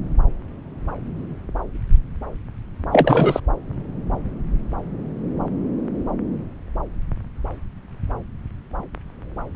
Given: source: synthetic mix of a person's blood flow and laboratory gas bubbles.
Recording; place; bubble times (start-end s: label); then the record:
Doppler ultrasound of blood flow; subclavian vein
2.92-3.40 s: bubbles
From the record:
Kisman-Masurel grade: 213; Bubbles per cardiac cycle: several, 3 to 8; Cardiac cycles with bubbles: 1 to 10%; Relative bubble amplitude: loud (0.450 to 0.775); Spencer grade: 1 (occasional bubble signal discernible with the cardiac motion signal, with majority of cardiac periods free of bubbles); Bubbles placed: anywhere in the cardiac cycle